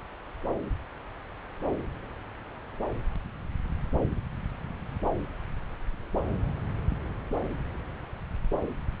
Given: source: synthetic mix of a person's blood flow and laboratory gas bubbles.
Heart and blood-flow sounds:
Doppler ultrasound of blood flow; subclavian vein
no bubbles
From the record:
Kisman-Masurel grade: 000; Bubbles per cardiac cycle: 0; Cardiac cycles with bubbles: 0%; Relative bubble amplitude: no bubbles discernible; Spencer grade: 0 (complete lack of bubble signals)

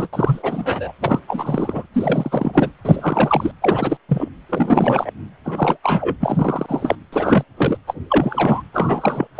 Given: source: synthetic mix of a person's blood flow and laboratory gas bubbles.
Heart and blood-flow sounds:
Doppler ultrasound of blood flow; precordium
0.00-0.08 s: bubbles
0.12-0.92 s: bubbles
1.00-1.19 s: bubbles
1.27-1.86 s: bubbles
1.93-2.71 s: bubbles
2.84-3.52 s: bubbles
3.62-3.97 s: bubbles
4.08-4.28 s: bubbles
4.49-5.10 s: bubbles
5.44-5.77 s: bubbles
5.83-6.15 s: bubbles
6.20-6.96 s: bubbles
7.12-7.43 s: bubbles
7.56-7.77 s: bubbles
7.86-7.94 s: bubbles
8.10-8.62 s: bubbles
8.73-9.28 s: bubbles
9.35-9.40 s: bubbles
From the record:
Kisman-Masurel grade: 343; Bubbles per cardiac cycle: rolling drumbeat, 9 or more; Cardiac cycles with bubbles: 100%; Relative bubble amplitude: loud (0.450 to 0.775); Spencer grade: 3 (all of the cardiac periods contain showers or single bubble signals, but not dominating or overriding the cardiac motion signals); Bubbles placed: anywhere in the cardiac cycle

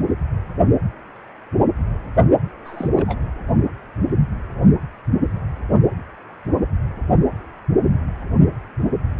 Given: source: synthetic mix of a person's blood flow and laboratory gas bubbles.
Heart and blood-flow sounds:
Doppler ultrasound of blood flow; precordium
2.65-2.91 s: bubbles
2.93-3.20 s: bubbles
From the record:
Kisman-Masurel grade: 211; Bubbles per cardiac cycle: several, 3 to 8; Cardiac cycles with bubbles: 1 to 10%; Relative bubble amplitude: barely perceptible (0.100 to 0.250); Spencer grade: 1 (occasional bubble signal discernible with the cardiac motion signal, with majority of cardiac periods free of bubbles); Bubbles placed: only in the low amplitude regions of the cardiac cycle

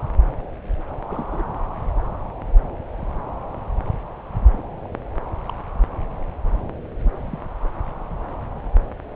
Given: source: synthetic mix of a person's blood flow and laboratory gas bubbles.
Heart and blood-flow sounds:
Doppler ultrasound of blood flow; subclavian vein
1.07-1.44 s: bubbles
4.53-4.63 s: bubbles
4.84-4.88 s: bubbles
5.48-5.52 s: bubbles
7.04-7.10 s: bubbles
7.21-7.39 s: bubbles
From the record:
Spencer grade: 2 (many but less than half of the cardiac periods contain bubble signals, singularly or in groups); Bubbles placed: anywhere in the cardiac cycle

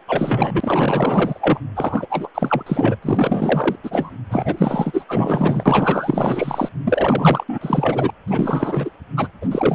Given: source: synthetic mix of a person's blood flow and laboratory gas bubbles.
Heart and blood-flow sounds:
Doppler ultrasound of blood flow; precordium
0.08-1.59 s: bubbles
1.75-2.28 s: bubbles
2.34-2.63 s: bubbles
2.66-2.96 s: bubbles
3.02-3.76 s: bubbles
3.83-4.11 s: bubbles
4.29-5.04 s: bubbles
5.08-6.69 s: bubbles
6.85-7.44 s: bubbles
7.49-7.58 s: bubbles
7.61-8.10 s: bubbles
8.27-8.90 s: bubbles
9.16-9.27 s: bubbles
9.41-9.75 s: bubbles
From the record:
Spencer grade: 4 (maximum detectable bubble signal sounding continuously throughout systole and diastole of every cardiac period, and overriding the amplitude of the normal cardiac signals); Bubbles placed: anywhere in the cardiac cycle

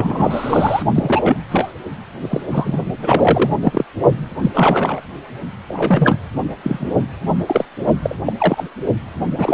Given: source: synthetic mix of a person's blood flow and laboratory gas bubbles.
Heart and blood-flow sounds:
Doppler ultrasound of blood flow; precordium
0.00-0.83 s: bubbles
0.94-1.36 s: bubbles
1.50-1.74 s: bubbles
2.21-2.42 s: bubbles
2.50-2.78 s: bubbles
2.96-3.51 s: bubbles
3.65-3.85 s: bubbles
4.42-4.51 s: bubbles
4.54-5.00 s: bubbles
5.69-6.17 s: bubbles
6.63-6.92 s: bubbles
7.46-7.65 s: bubbles
8.02-8.15 s: bubbles
8.26-8.33 s: bubbles
8.38-8.63 s: bubbles
9.35-9.54 s: bubbles
From the record:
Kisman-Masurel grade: 243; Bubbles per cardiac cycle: several, 3 to 8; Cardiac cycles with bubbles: 100%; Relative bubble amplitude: loud (0.450 to 0.775); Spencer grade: 3 (all of the cardiac periods contain showers or single bubble signals, but not dominating or overriding the cardiac motion signals); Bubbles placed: only in the low amplitude regions of the cardiac cycle

